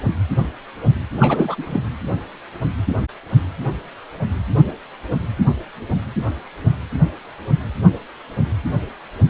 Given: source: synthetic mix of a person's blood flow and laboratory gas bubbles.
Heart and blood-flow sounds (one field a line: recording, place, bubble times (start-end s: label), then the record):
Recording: Doppler ultrasound of blood flow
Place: precordium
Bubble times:
1.19-1.80 s: bubbles
From the record:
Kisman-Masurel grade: 212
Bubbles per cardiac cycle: several, 3 to 8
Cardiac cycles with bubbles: 1 to 10%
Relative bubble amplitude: moderate (0.250 to 0.450)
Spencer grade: 1 (occasional bubble signal discernible with the cardiac motion signal, with majority of cardiac periods free of bubbles)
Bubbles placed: anywhere in the cardiac cycle